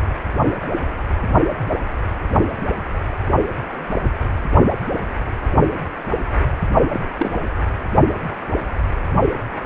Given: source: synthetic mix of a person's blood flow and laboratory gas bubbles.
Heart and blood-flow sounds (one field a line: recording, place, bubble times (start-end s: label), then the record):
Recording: Doppler ultrasound of blood flow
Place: precordium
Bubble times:
6.93-7.09 s: bubbles
7.19-7.32 s: bubbles
From the record:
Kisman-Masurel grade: 212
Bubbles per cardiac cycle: several, 3 to 8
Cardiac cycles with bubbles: 1 to 10%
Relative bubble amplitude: moderate (0.250 to 0.450)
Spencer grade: 1 (occasional bubble signal discernible with the cardiac motion signal, with majority of cardiac periods free of bubbles)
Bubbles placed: only in the low amplitude regions of the cardiac cycle